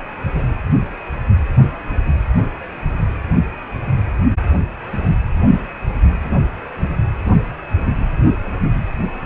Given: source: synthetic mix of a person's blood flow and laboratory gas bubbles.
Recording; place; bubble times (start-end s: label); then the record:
Doppler ultrasound of blood flow; precordium
0.32-0.60 s: bubbles
From the record:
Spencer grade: 1 (occasional bubble signal discernible with the cardiac motion signal, with majority of cardiac periods free of bubbles); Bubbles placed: anywhere in the cardiac cycle